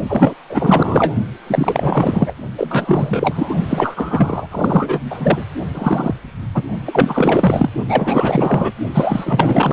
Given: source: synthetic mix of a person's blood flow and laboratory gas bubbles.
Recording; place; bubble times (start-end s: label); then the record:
Doppler ultrasound of blood flow; precordium
0.08-0.34 s: bubbles
0.49-1.13 s: bubbles
1.46-2.35 s: bubbles
2.57-3.55 s: bubbles
3.69-4.48 s: bubbles
4.51-5.45 s: bubbles
5.74-6.15 s: bubbles
6.54-6.63 s: bubbles
6.84-7.70 s: bubbles
7.88-8.72 s: bubbles
8.94-9.73 s: bubbles
From the record:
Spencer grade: 4 (maximum detectable bubble signal sounding continuously throughout systole and diastole of every cardiac period, and overriding the amplitude of the normal cardiac signals); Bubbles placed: only in the low amplitude regions of the cardiac cycle